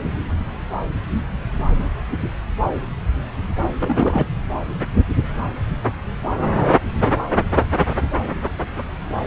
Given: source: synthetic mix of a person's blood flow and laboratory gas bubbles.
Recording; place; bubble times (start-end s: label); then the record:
Doppler ultrasound of blood flow; subclavian vein
3.79-4.29 s: bubbles
From the record:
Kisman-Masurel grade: 212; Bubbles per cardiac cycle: several, 3 to 8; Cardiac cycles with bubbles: 1 to 10%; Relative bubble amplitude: moderate (0.250 to 0.450); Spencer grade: 1 (occasional bubble signal discernible with the cardiac motion signal, with majority of cardiac periods free of bubbles); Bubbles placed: anywhere in the cardiac cycle